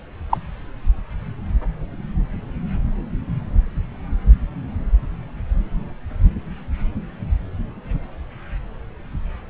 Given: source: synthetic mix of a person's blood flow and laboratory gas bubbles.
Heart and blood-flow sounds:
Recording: Doppler ultrasound of blood flow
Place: subclavian vein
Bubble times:
0.29-0.38 s: bubbles
From the record:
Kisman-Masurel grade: 113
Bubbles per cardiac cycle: 1 to 2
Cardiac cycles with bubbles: 1 to 10%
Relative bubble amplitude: loud (0.450 to 0.775)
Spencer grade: 1 (occasional bubble signal discernible with the cardiac motion signal, with majority of cardiac periods free of bubbles)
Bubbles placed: anywhere in the cardiac cycle

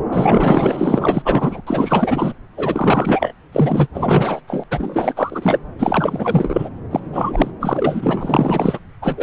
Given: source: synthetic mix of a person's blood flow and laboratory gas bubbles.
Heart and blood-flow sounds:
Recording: Doppler ultrasound of blood flow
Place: subclavian vein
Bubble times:
0.12-1.23 s: bubbles
1.25-1.61 s: bubbles
1.67-2.33 s: bubbles
2.57-3.33 s: bubbles
3.52-3.88 s: bubbles
3.94-4.40 s: bubbles
4.47-4.64 s: bubbles
4.71-5.59 s: bubbles
5.78-6.69 s: bubbles
6.91-7.00 s: bubbles
7.12-7.51 s: bubbles
7.60-8.79 s: bubbles
9.02-9.23 s: bubbles
From the record:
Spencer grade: 4 (maximum detectable bubble signal sounding continuously throughout systole and diastole of every cardiac period, and overriding the amplitude of the normal cardiac signals)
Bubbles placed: anywhere in the cardiac cycle

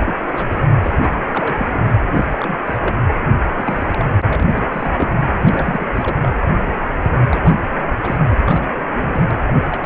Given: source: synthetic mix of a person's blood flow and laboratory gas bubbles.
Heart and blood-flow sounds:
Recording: Doppler ultrasound of blood flow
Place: precordium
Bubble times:
0.05-0.14 s: bubbles
0.32-0.65 s: bubbles
0.81-1.17 s: bubbles
1.32-1.68 s: bubbles
1.73-1.80 s: bubbles
2.09-2.27 s: bubbles
2.31-2.58 s: bubbles
2.65-2.77 s: bubbles
2.81-3.02 s: bubbles
3.44-4.17 s: bubbles
4.25-4.64 s: bubbles
4.68-5.25 s: bubbles
5.37-5.88 s: bubbles
5.95-6.16 s: bubbles
6.22-6.33 s: bubbles
7.03-7.10 s: bubbles
7.28-7.69 s: bubbles
8.02-8.17 s: bubbles
8.28-8.39 s: bubbles
8.48-8.74 s: bubbles
8.95-9.31 s: bubbles
9.47-9.58 s: bubbles
9.63-9.86 s: bubbles
From the record:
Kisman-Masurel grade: 342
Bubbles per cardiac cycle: rolling drumbeat, 9 or more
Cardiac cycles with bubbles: 100%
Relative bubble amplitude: moderate (0.250 to 0.450)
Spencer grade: 3 (all of the cardiac periods contain showers or single bubble signals, but not dominating or overriding the cardiac motion signals)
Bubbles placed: anywhere in the cardiac cycle

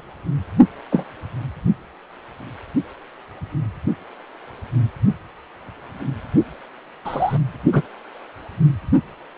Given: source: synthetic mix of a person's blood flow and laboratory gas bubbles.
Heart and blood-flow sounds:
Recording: Doppler ultrasound of blood flow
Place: precordium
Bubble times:
0.92-1.05 s: bubbles
7.04-7.38 s: bubbles
7.72-7.82 s: bubbles
From the record:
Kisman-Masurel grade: 123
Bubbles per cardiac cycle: 1 to 2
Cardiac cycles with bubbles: 10 to 50%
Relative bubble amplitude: loud (0.450 to 0.775)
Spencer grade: 2 (many but less than half of the cardiac periods contain bubble signals, singularly or in groups)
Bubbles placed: only in the low amplitude regions of the cardiac cycle

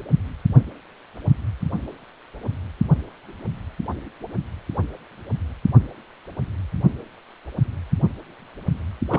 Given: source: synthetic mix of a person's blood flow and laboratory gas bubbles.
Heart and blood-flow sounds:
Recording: Doppler ultrasound of blood flow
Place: precordium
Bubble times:
9.09-9.19 s: bubbles
From the record:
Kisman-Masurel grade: 212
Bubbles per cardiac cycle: several, 3 to 8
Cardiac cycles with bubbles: 1 to 10%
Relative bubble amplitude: moderate (0.250 to 0.450)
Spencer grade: 1 (occasional bubble signal discernible with the cardiac motion signal, with majority of cardiac periods free of bubbles)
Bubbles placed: only in the low amplitude regions of the cardiac cycle

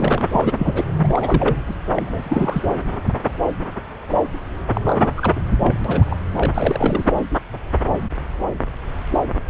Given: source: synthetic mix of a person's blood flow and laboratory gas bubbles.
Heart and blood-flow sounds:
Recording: Doppler ultrasound of blood flow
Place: subclavian vein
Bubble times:
0.00-0.28 s: bubbles
0.31-0.84 s: bubbles
1.04-1.75 s: bubbles
1.95-2.62 s: bubbles
4.73-4.81 s: bubbles
4.84-5.10 s: bubbles
5.17-5.33 s: bubbles
5.35-5.40 s: bubbles
5.50-5.56 s: bubbles
5.60-5.77 s: bubbles
5.84-6.04 s: bubbles
6.06-6.16 s: bubbles
6.33-7.12 s: bubbles
From the record:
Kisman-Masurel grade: 332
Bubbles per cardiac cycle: rolling drumbeat, 9 or more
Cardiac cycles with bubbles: 50 to 99%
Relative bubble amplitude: moderate (0.250 to 0.450)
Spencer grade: 3 (all of the cardiac periods contain showers or single bubble signals, but not dominating or overriding the cardiac motion signals)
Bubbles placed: anywhere in the cardiac cycle

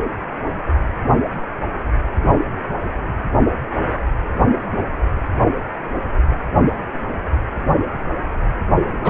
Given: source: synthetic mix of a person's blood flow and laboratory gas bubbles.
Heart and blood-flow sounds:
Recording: Doppler ultrasound of blood flow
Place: precordium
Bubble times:
9.04-9.10 s: bubbles
From the record:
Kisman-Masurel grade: 213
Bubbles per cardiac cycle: several, 3 to 8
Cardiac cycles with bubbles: 1 to 10%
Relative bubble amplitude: loud (0.450 to 0.775)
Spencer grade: 1 (occasional bubble signal discernible with the cardiac motion signal, with majority of cardiac periods free of bubbles)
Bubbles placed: anywhere in the cardiac cycle

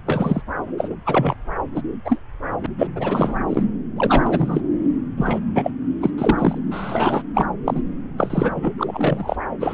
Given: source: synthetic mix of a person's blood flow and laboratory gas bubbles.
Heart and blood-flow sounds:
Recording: Doppler ultrasound of blood flow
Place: subclavian vein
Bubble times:
0.06-0.42 s: bubbles
0.77-0.96 s: bubbles
1.05-1.34 s: bubbles
1.75-1.81 s: bubbles
2.04-2.21 s: bubbles
2.60-2.67 s: bubbles
2.78-2.88 s: bubbles
2.94-3.35 s: bubbles
3.48-3.63 s: bubbles
3.96-4.24 s: bubbles
4.26-4.62 s: bubbles
5.17-5.38 s: bubbles
5.54-5.71 s: bubbles
6.00-6.11 s: bubbles
6.17-6.58 s: bubbles
6.71-7.22 s: bubbles
7.34-7.46 s: bubbles
7.65-7.82 s: bubbles
8.18-8.71 s: bubbles
8.78-9.36 s: bubbles
9.60-9.74 s: bubbles
From the record:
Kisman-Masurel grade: 233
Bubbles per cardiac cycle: several, 3 to 8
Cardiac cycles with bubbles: 50 to 99%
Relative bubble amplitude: loud (0.450 to 0.775)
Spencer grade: 3 (all of the cardiac periods contain showers or single bubble signals, but not dominating or overriding the cardiac motion signals)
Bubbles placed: anywhere in the cardiac cycle

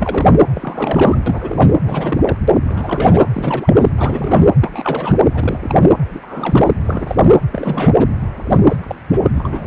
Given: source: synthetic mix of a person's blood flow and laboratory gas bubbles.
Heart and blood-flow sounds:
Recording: Doppler ultrasound of blood flow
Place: precordium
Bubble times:
0.00-0.41 s: bubbles
0.54-1.20 s: bubbles
1.26-1.72 s: bubbles
1.83-2.37 s: bubbles
2.64-3.29 s: bubbles
3.33-3.75 s: bubbles
3.79-3.93 s: bubbles
3.98-4.47 s: bubbles
4.61-5.14 s: bubbles
5.29-5.59 s: bubbles
5.63-5.94 s: bubbles
6.10-6.71 s: bubbles
6.85-7.29 s: bubbles
7.52-7.92 s: bubbles
7.98-8.10 s: bubbles
8.50-8.58 s: bubbles
8.62-8.77 s: bubbles
8.83-8.96 s: bubbles
9.08-9.29 s: bubbles
9.34-9.66 s: bubbles
From the record:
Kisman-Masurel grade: 342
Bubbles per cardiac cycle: rolling drumbeat, 9 or more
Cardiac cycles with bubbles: 100%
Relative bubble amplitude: moderate (0.250 to 0.450)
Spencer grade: 3 (all of the cardiac periods contain showers or single bubble signals, but not dominating or overriding the cardiac motion signals)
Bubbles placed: anywhere in the cardiac cycle

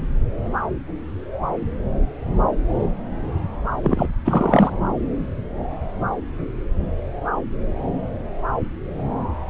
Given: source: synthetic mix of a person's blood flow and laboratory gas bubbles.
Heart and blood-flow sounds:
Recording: Doppler ultrasound of blood flow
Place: subclavian vein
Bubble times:
3.83-4.07 s: bubbles
4.25-4.71 s: bubbles
From the record:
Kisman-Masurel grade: 213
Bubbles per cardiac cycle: several, 3 to 8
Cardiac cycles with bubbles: 1 to 10%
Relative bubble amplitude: loud (0.450 to 0.775)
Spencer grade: 1 (occasional bubble signal discernible with the cardiac motion signal, with majority of cardiac periods free of bubbles)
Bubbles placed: anywhere in the cardiac cycle

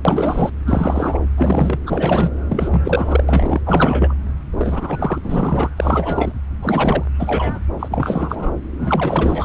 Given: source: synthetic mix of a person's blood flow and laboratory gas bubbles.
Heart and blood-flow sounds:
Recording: Doppler ultrasound of blood flow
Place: subclavian vein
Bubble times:
0.05-0.50 s: bubbles
0.67-1.19 s: bubbles
1.37-1.79 s: bubbles
1.86-2.30 s: bubbles
2.49-3.24 s: bubbles
3.29-3.62 s: bubbles
3.66-4.15 s: bubbles
4.57-5.18 s: bubbles
5.23-5.70 s: bubbles
5.76-6.33 s: bubbles
6.62-7.04 s: bubbles
7.19-7.59 s: bubbles
7.79-8.51 s: bubbles
8.78-9.45 s: bubbles
From the record:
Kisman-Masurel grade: 343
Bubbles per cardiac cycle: rolling drumbeat, 9 or more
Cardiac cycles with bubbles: 100%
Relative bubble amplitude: loud (0.450 to 0.775)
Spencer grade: 3 (all of the cardiac periods contain showers or single bubble signals, but not dominating or overriding the cardiac motion signals)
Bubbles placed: anywhere in the cardiac cycle

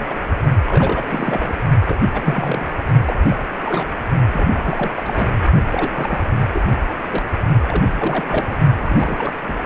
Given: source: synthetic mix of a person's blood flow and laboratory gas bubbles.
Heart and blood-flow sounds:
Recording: Doppler ultrasound of blood flow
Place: precordium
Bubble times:
0.00-0.07 s: bubbles
0.09-0.17 s: bubbles
0.27-0.33 s: bubbles
0.65-1.54 s: bubbles
1.85-1.96 s: bubbles
2.13-2.70 s: bubbles
3.05-3.16 s: bubbles
3.29-3.39 s: bubbles
3.65-3.90 s: bubbles
4.33-4.91 s: bubbles
4.96-5.29 s: bubbles
5.71-6.20 s: bubbles
6.52-6.62 s: bubbles
7.11-7.23 s: bubbles
7.68-7.84 s: bubbles
7.99-8.26 s: bubbles
8.29-8.57 s: bubbles
8.82-9.37 s: bubbles
9.47-9.57 s: bubbles
From the record:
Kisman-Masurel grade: 342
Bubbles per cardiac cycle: rolling drumbeat, 9 or more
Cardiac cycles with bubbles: 100%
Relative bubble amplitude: moderate (0.250 to 0.450)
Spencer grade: 3 (all of the cardiac periods contain showers or single bubble signals, but not dominating or overriding the cardiac motion signals)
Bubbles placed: only in the low amplitude regions of the cardiac cycle

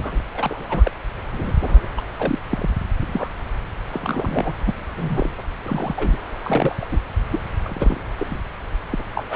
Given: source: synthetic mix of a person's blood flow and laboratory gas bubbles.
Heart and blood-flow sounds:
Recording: Doppler ultrasound of blood flow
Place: subclavian vein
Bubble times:
0.00-0.20 s: bubbles
0.34-0.91 s: bubbles
1.33-1.53 s: bubbles
1.60-1.86 s: bubbles
1.97-2.01 s: bubbles
2.19-2.39 s: bubbles
2.51-2.70 s: bubbles
3.01-3.31 s: bubbles
3.91-4.53 s: bubbles
4.66-4.75 s: bubbles
4.96-5.31 s: bubbles
5.38-5.41 s: bubbles
5.65-6.17 s: bubbles
6.42-6.76 s: bubbles
6.79-6.86 s: bubbles
6.92-6.99 s: bubbles
7.30-7.40 s: bubbles
7.65-8.00 s: bubbles
8.18-8.38 s: bubbles
8.90-9.03 s: bubbles
9.15-9.23 s: bubbles
9.30-9.36 s: bubbles
From the record:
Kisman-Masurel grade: 242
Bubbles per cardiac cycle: several, 3 to 8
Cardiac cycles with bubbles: 100%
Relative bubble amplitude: moderate (0.250 to 0.450)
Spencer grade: 3 (all of the cardiac periods contain showers or single bubble signals, but not dominating or overriding the cardiac motion signals)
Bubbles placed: anywhere in the cardiac cycle

